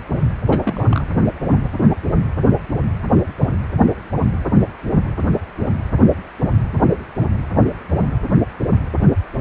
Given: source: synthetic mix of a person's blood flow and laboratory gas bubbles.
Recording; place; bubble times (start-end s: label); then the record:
Doppler ultrasound of blood flow; precordium
0.48-1.06 s: bubbles
From the record:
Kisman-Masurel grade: 122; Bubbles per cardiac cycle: 1 to 2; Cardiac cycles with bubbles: 10 to 50%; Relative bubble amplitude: moderate (0.250 to 0.450); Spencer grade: 2 (many but less than half of the cardiac periods contain bubble signals, singularly or in groups); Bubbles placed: anywhere in the cardiac cycle